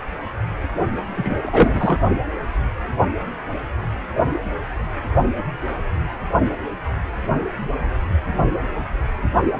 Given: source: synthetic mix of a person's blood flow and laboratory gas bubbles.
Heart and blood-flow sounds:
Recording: Doppler ultrasound of blood flow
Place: precordium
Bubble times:
1.16-1.34 s: bubbles
1.42-2.00 s: bubbles
From the record:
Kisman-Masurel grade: 213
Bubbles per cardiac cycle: several, 3 to 8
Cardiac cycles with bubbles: 1 to 10%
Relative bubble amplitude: loud (0.450 to 0.775)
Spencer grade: 1 (occasional bubble signal discernible with the cardiac motion signal, with majority of cardiac periods free of bubbles)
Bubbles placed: only in the low amplitude regions of the cardiac cycle

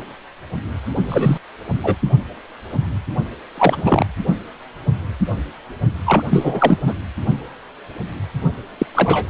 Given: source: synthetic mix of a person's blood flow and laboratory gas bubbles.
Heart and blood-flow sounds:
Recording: Doppler ultrasound of blood flow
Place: precordium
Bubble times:
1.08-1.38 s: bubbles
1.82-1.96 s: bubbles
3.55-4.06 s: bubbles
6.04-6.23 s: bubbles
6.30-6.78 s: bubbles
6.86-6.94 s: bubbles
8.78-8.86 s: bubbles
8.95-9.29 s: bubbles
From the record:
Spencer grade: 3 (all of the cardiac periods contain showers or single bubble signals, but not dominating or overriding the cardiac motion signals)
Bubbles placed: only in the low amplitude regions of the cardiac cycle

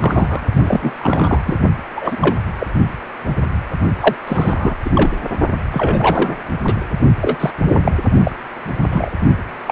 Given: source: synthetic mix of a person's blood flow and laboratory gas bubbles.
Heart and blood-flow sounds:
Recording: Doppler ultrasound of blood flow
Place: precordium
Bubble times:
0.01-0.45 s: bubbles
0.52-0.94 s: bubbles
0.99-1.41 s: bubbles
1.45-1.56 s: bubbles
1.96-2.17 s: bubbles
2.21-2.35 s: bubbles
2.59-2.67 s: bubbles
4.00-4.15 s: bubbles
4.27-4.76 s: bubbles
4.84-4.91 s: bubbles
4.95-5.17 s: bubbles
5.71-6.34 s: bubbles
6.64-6.74 s: bubbles
7.21-7.38 s: bubbles
7.40-7.50 s: bubbles
7.66-7.92 s: bubbles
8.23-8.36 s: bubbles
8.90-9.10 s: bubbles
9.66-9.72 s: bubbles
From the record:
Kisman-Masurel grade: 233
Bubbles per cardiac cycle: several, 3 to 8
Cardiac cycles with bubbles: 50 to 99%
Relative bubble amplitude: loud (0.450 to 0.775)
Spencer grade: 3 (all of the cardiac periods contain showers or single bubble signals, but not dominating or overriding the cardiac motion signals)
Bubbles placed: only in the low amplitude regions of the cardiac cycle

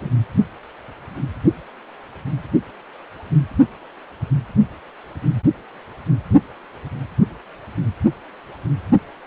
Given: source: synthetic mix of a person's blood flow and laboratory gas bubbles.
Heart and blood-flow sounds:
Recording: Doppler ultrasound of blood flow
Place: precordium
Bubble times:
0.00-0.10 s: bubbles
From the record:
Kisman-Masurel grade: 112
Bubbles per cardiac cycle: 1 to 2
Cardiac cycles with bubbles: 1 to 10%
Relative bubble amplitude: moderate (0.250 to 0.450)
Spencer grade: 1 (occasional bubble signal discernible with the cardiac motion signal, with majority of cardiac periods free of bubbles)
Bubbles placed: only in the low amplitude regions of the cardiac cycle

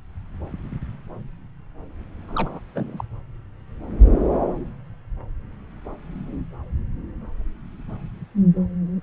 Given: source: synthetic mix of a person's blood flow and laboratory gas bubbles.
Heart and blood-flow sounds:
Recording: Doppler ultrasound of blood flow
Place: subclavian vein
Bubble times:
2.28-2.59 s: bubbles
2.75-3.04 s: bubbles
From the record:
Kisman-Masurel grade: 211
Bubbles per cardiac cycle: several, 3 to 8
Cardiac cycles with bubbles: 1 to 10%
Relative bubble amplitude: barely perceptible (0.100 to 0.250)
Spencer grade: 1 (occasional bubble signal discernible with the cardiac motion signal, with majority of cardiac periods free of bubbles)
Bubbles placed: anywhere in the cardiac cycle

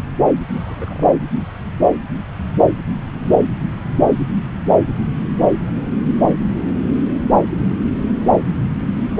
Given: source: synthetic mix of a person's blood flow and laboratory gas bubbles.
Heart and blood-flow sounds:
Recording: Doppler ultrasound of blood flow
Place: subclavian vein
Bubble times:
0.54-1.10 s: bubbles
From the record:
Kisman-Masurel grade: 211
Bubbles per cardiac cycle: several, 3 to 8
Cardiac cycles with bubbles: 1 to 10%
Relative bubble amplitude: barely perceptible (0.100 to 0.250)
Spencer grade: 1 (occasional bubble signal discernible with the cardiac motion signal, with majority of cardiac periods free of bubbles)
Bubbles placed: anywhere in the cardiac cycle

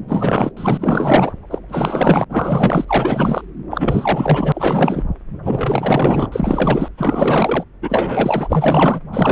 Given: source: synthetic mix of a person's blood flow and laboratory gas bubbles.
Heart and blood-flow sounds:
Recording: Doppler ultrasound of blood flow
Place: subclavian vein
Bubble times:
0.08-0.52 s: bubbles
0.56-1.33 s: bubbles
1.50-1.58 s: bubbles
1.68-2.24 s: bubbles
2.29-2.85 s: bubbles
2.88-3.44 s: bubbles
3.70-5.04 s: bubbles
5.43-6.29 s: bubbles
6.32-6.88 s: bubbles
6.97-7.65 s: bubbles
7.81-9.00 s: bubbles
9.12-9.32 s: bubbles
From the record:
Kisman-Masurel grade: 444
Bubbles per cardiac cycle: continuous sound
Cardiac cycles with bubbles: 100%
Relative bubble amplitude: maximal (0.775 to 0.999)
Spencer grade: 4 (maximum detectable bubble signal sounding continuously throughout systole and diastole of every cardiac period, and overriding the amplitude of the normal cardiac signals)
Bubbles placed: anywhere in the cardiac cycle

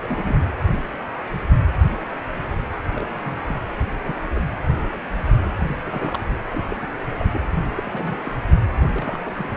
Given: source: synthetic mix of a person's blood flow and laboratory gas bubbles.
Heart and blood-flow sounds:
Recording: Doppler ultrasound of blood flow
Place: precordium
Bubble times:
0.00-0.40 s: bubbles
2.95-3.39 s: bubbles
3.48-3.57 s: bubbles
4.04-4.16 s: bubbles
4.34-4.42 s: bubbles
5.59-5.64 s: bubbles
5.67-5.79 s: bubbles
5.86-6.18 s: bubbles
6.51-6.64 s: bubbles
6.68-6.86 s: bubbles
7.09-7.41 s: bubbles
7.76-8.21 s: bubbles
8.24-8.33 s: bubbles
8.93-9.31 s: bubbles
9.36-9.57 s: bubbles
From the record:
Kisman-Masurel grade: 221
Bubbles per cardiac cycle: several, 3 to 8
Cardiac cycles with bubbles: 10 to 50%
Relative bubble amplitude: barely perceptible (0.100 to 0.250)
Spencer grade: 2 (many but less than half of the cardiac periods contain bubble signals, singularly or in groups)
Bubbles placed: anywhere in the cardiac cycle

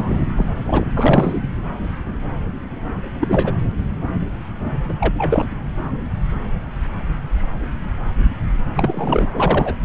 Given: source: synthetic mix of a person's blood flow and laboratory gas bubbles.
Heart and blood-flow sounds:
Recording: Doppler ultrasound of blood flow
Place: subclavian vein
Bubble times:
0.00-0.24 s: bubbles
0.36-0.55 s: bubbles
0.66-0.85 s: bubbles
0.96-1.39 s: bubbles
3.20-3.53 s: bubbles
4.88-4.92 s: bubbles
5.00-5.14 s: bubbles
5.18-5.46 s: bubbles
8.74-9.28 s: bubbles
9.34-9.74 s: bubbles
From the record:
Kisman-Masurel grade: 222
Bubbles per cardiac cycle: several, 3 to 8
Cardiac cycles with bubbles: 10 to 50%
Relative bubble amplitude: moderate (0.250 to 0.450)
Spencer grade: 2 (many but less than half of the cardiac periods contain bubble signals, singularly or in groups)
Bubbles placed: anywhere in the cardiac cycle

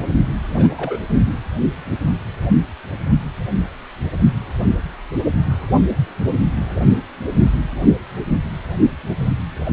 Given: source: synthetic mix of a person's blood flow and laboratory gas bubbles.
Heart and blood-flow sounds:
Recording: Doppler ultrasound of blood flow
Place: precordium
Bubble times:
0.53-0.97 s: bubbles
From the record:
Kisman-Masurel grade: 221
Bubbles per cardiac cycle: several, 3 to 8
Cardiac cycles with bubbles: 10 to 50%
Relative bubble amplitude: barely perceptible (0.100 to 0.250)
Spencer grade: 2 (many but less than half of the cardiac periods contain bubble signals, singularly or in groups)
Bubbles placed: only in the low amplitude regions of the cardiac cycle

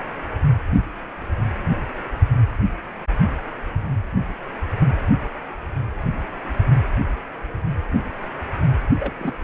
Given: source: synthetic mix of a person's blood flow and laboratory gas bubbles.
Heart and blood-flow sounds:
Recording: Doppler ultrasound of blood flow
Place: precordium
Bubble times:
8.99-9.13 s: bubbles
9.19-9.34 s: bubbles
From the record:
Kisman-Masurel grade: 211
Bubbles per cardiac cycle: several, 3 to 8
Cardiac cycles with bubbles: 1 to 10%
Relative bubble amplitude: barely perceptible (0.100 to 0.250)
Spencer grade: 1 (occasional bubble signal discernible with the cardiac motion signal, with majority of cardiac periods free of bubbles)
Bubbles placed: anywhere in the cardiac cycle

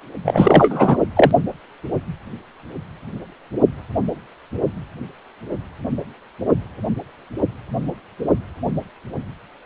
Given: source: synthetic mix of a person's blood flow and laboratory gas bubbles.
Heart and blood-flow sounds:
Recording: Doppler ultrasound of blood flow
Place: precordium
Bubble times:
0.25-0.97 s: bubbles
1.16-1.31 s: bubbles
From the record:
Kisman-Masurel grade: 213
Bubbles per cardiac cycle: several, 3 to 8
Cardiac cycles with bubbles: 1 to 10%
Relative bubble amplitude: loud (0.450 to 0.775)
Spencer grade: 1 (occasional bubble signal discernible with the cardiac motion signal, with majority of cardiac periods free of bubbles)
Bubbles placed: only in the low amplitude regions of the cardiac cycle

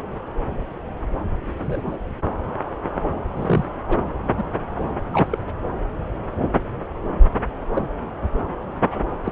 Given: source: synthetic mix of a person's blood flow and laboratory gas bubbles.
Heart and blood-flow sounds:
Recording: Doppler ultrasound of blood flow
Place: subclavian vein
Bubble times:
1.57-1.98 s: bubbles
3.36-3.65 s: bubbles
3.88-3.98 s: bubbles
4.37-4.45 s: bubbles
5.13-5.43 s: bubbles
7.75-7.89 s: bubbles
9.24-9.32 s: bubbles
From the record:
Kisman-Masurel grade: 122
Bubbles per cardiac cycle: 1 to 2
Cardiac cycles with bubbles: 10 to 50%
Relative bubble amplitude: moderate (0.250 to 0.450)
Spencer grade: 2 (many but less than half of the cardiac periods contain bubble signals, singularly or in groups)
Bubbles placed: anywhere in the cardiac cycle

